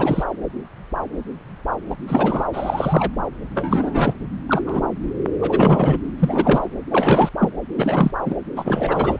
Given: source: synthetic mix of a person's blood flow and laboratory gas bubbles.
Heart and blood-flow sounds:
Doppler ultrasound of blood flow; subclavian vein
0.00-0.24 s: bubbles
1.90-1.96 s: bubbles
2.07-2.47 s: bubbles
2.52-3.11 s: bubbles
3.54-4.14 s: bubbles
4.48-4.62 s: bubbles
4.66-4.81 s: bubbles
5.41-5.98 s: bubbles
6.19-6.68 s: bubbles
6.90-7.29 s: bubbles
7.39-7.50 s: bubbles
7.77-8.11 s: bubbles
8.26-8.34 s: bubbles
8.56-9.18 s: bubbles
From the record:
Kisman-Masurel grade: 332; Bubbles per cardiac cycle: rolling drumbeat, 9 or more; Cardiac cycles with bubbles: 50 to 99%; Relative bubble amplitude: moderate (0.250 to 0.450); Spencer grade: 3 (all of the cardiac periods contain showers or single bubble signals, but not dominating or overriding the cardiac motion signals); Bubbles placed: anywhere in the cardiac cycle

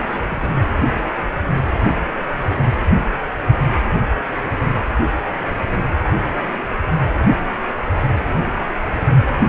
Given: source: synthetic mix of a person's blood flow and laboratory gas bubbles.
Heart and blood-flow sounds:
Doppler ultrasound of blood flow; precordium
0.00-0.57 s: bubbles
From the record:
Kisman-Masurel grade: 211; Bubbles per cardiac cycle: several, 3 to 8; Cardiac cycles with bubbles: 1 to 10%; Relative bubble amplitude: barely perceptible (0.100 to 0.250); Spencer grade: 1 (occasional bubble signal discernible with the cardiac motion signal, with majority of cardiac periods free of bubbles); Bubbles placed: anywhere in the cardiac cycle

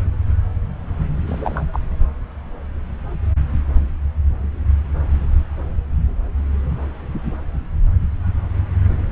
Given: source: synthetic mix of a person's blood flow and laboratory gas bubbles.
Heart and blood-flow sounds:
Doppler ultrasound of blood flow; subclavian vein
1.26-1.65 s: bubbles
1.73-1.79 s: bubbles
From the record:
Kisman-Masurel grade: 112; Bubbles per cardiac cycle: 1 to 2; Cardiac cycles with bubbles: 1 to 10%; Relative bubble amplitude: moderate (0.250 to 0.450); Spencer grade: 1 (occasional bubble signal discernible with the cardiac motion signal, with majority of cardiac periods free of bubbles); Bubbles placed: anywhere in the cardiac cycle

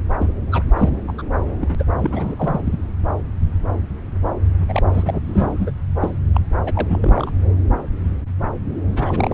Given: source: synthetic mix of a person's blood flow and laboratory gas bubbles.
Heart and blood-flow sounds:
Doppler ultrasound of blood flow; subclavian vein
0.19-0.33 s: bubbles
0.52-0.64 s: bubbles
0.76-1.01 s: bubbles
1.07-1.12 s: bubbles
1.18-1.22 s: bubbles
1.61-1.75 s: bubbles
1.78-1.83 s: bubbles
1.99-2.61 s: bubbles
2.64-2.81 s: bubbles
4.68-4.83 s: bubbles
4.93-5.71 s: bubbles
6.01-6.11 s: bubbles
6.34-6.40 s: bubbles
6.65-7.31 s: bubbles
8.92-9.34 s: bubbles
From the record:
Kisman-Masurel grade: 332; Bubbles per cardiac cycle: rolling drumbeat, 9 or more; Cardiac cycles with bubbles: 50 to 99%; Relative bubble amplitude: moderate (0.250 to 0.450); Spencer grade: 3 (all of the cardiac periods contain showers or single bubble signals, but not dominating or overriding the cardiac motion signals); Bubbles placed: anywhere in the cardiac cycle

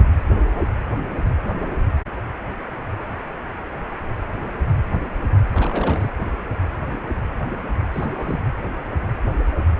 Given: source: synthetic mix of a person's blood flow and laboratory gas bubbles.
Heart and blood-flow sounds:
Doppler ultrasound of blood flow; precordium
5.54-6.09 s: bubbles
7.93-8.43 s: bubbles
From the record:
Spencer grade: 1 (occasional bubble signal discernible with the cardiac motion signal, with majority of cardiac periods free of bubbles); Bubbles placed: anywhere in the cardiac cycle

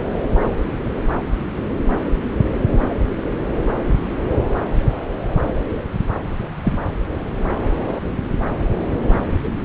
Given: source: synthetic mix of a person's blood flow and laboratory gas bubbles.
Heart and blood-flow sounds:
Doppler ultrasound of blood flow; subclavian vein
6.63-6.78 s: bubbles
From the record:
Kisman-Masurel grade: 112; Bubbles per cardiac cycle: 1 to 2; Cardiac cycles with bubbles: 1 to 10%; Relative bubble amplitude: moderate (0.250 to 0.450); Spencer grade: 1 (occasional bubble signal discernible with the cardiac motion signal, with majority of cardiac periods free of bubbles); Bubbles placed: anywhere in the cardiac cycle

